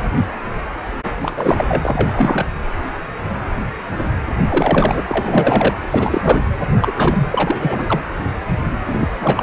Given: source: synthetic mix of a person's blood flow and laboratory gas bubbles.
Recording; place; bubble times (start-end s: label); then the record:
Doppler ultrasound of blood flow; precordium
1.04-1.10 s: bubbles
1.17-2.46 s: bubbles
4.38-5.04 s: bubbles
5.08-5.77 s: bubbles
5.91-6.42 s: bubbles
6.81-6.93 s: bubbles
6.96-7.29 s: bubbles
7.32-8.00 s: bubbles
8.87-9.10 s: bubbles
9.20-9.43 s: bubbles
From the record:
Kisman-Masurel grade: 333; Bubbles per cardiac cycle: rolling drumbeat, 9 or more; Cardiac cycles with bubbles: 50 to 99%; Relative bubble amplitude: loud (0.450 to 0.775); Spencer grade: 3 (all of the cardiac periods contain showers or single bubble signals, but not dominating or overriding the cardiac motion signals); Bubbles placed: anywhere in the cardiac cycle